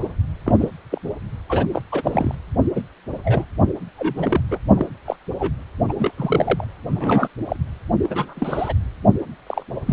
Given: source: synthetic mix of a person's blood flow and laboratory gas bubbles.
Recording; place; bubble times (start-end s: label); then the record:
Doppler ultrasound of blood flow; precordium
0.46-0.56 s: bubbles
0.59-0.70 s: bubbles
0.90-0.98 s: bubbles
1.49-1.66 s: bubbles
1.72-1.81 s: bubbles
1.92-2.35 s: bubbles
2.75-2.83 s: bubbles
3.23-3.45 s: bubbles
3.96-4.42 s: bubbles
4.50-4.59 s: bubbles
4.75-4.89 s: bubbles
5.05-5.16 s: bubbles
5.39-5.51 s: bubbles
5.88-5.93 s: bubbles
5.99-6.12 s: bubbles
6.17-6.64 s: bubbles
6.89-7.28 s: bubbles
7.45-7.56 s: bubbles
8.02-8.74 s: bubbles
9.47-9.64 s: bubbles
9.86-9.93 s: bubbles
From the record:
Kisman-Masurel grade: 232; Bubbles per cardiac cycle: several, 3 to 8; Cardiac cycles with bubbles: 50 to 99%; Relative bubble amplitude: moderate (0.250 to 0.450); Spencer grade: 3 (all of the cardiac periods contain showers or single bubble signals, but not dominating or overriding the cardiac motion signals); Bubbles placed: anywhere in the cardiac cycle